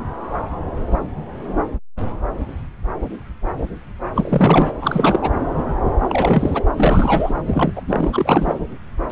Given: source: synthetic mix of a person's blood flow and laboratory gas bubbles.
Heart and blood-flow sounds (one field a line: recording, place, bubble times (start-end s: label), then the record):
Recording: Doppler ultrasound of blood flow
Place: subclavian vein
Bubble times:
4.15-4.73 s: bubbles
4.81-5.32 s: bubbles
6.08-6.63 s: bubbles
6.76-7.34 s: bubbles
7.46-7.82 s: bubbles
7.88-8.10 s: bubbles
8.12-8.59 s: bubbles
9.09-9.12 s: bubbles
From the record:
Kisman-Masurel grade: 333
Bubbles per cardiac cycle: rolling drumbeat, 9 or more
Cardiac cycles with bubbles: 50 to 99%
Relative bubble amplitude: loud (0.450 to 0.775)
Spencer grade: 3 (all of the cardiac periods contain showers or single bubble signals, but not dominating or overriding the cardiac motion signals)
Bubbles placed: anywhere in the cardiac cycle